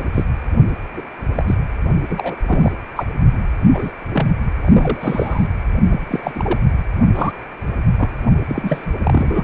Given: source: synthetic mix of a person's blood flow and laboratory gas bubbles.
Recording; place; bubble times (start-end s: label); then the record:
Doppler ultrasound of blood flow; precordium
0.14-0.24 s: bubbles
0.94-1.02 s: bubbles
1.36-1.45 s: bubbles
1.47-1.54 s: bubbles
2.10-2.37 s: bubbles
2.42-2.72 s: bubbles
2.95-3.04 s: bubbles
3.71-3.93 s: bubbles
4.12-4.27 s: bubbles
4.61-5.48 s: bubbles
5.89-6.02 s: bubbles
6.07-6.58 s: bubbles
7.14-7.32 s: bubbles
7.98-8.09 s: bubbles
8.48-8.87 s: bubbles
8.97-9.44 s: bubbles
From the record:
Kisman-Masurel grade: 242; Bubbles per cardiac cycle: several, 3 to 8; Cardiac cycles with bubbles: 100%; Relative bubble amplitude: moderate (0.250 to 0.450); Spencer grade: 3 (all of the cardiac periods contain showers or single bubble signals, but not dominating or overriding the cardiac motion signals); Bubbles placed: only in the low amplitude regions of the cardiac cycle